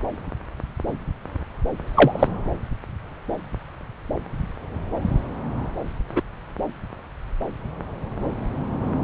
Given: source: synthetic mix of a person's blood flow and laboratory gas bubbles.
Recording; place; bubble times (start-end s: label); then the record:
Doppler ultrasound of blood flow; subclavian vein
1.94-2.27 s: bubbles
6.16-6.21 s: bubbles
From the record:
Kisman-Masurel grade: 123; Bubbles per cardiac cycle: 1 to 2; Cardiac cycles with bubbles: 10 to 50%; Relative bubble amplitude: loud (0.450 to 0.775); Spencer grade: 2 (many but less than half of the cardiac periods contain bubble signals, singularly or in groups); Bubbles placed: anywhere in the cardiac cycle